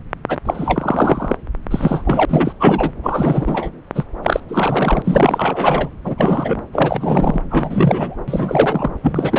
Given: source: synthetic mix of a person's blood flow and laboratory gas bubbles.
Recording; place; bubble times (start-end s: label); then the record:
Doppler ultrasound of blood flow; subclavian vein
0.28-0.38 s: bubbles
0.45-1.36 s: bubbles
1.70-2.53 s: bubbles
2.60-2.92 s: bubbles
3.03-3.71 s: bubbles
3.95-4.04 s: bubbles
4.23-4.40 s: bubbles
4.49-5.90 s: bubbles
6.04-6.62 s: bubbles
6.73-7.41 s: bubbles
7.50-8.15 s: bubbles
8.28-8.89 s: bubbles
9.03-9.39 s: bubbles
From the record:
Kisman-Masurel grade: 343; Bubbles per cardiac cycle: rolling drumbeat, 9 or more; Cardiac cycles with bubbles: 100%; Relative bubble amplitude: loud (0.450 to 0.775); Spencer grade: 3 (all of the cardiac periods contain showers or single bubble signals, but not dominating or overriding the cardiac motion signals); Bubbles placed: anywhere in the cardiac cycle